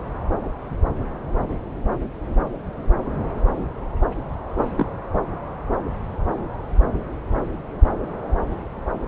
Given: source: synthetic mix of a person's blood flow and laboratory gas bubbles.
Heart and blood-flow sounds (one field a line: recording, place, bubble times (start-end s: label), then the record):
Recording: Doppler ultrasound of blood flow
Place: subclavian vein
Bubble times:
4.76-4.92 s: bubbles
From the record:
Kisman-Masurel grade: 112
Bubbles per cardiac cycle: 1 to 2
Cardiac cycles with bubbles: 1 to 10%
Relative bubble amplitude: moderate (0.250 to 0.450)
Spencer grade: 1 (occasional bubble signal discernible with the cardiac motion signal, with majority of cardiac periods free of bubbles)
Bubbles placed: anywhere in the cardiac cycle